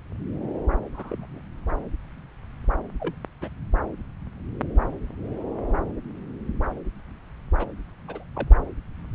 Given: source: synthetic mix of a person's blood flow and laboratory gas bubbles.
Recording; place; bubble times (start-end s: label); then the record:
Doppler ultrasound of blood flow; subclavian vein
0.94-1.40 s: bubbles
3.00-3.15 s: bubbles
3.41-3.49 s: bubbles
7.57-7.67 s: bubbles
8.07-8.23 s: bubbles
8.35-8.49 s: bubbles
From the record:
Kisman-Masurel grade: 121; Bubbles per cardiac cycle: 1 to 2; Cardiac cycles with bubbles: 10 to 50%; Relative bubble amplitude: barely perceptible (0.100 to 0.250); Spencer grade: 2 (many but less than half of the cardiac periods contain bubble signals, singularly or in groups); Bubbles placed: anywhere in the cardiac cycle